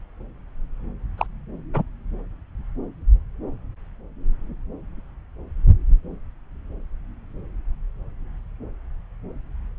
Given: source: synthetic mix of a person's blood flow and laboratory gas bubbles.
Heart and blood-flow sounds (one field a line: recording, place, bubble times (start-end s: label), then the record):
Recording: Doppler ultrasound of blood flow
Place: subclavian vein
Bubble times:
1.18-1.27 s: bubbles
1.74-1.83 s: bubbles
From the record:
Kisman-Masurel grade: 122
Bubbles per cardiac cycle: 1 to 2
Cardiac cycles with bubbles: 10 to 50%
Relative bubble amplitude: moderate (0.250 to 0.450)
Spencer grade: 2 (many but less than half of the cardiac periods contain bubble signals, singularly or in groups)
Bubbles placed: anywhere in the cardiac cycle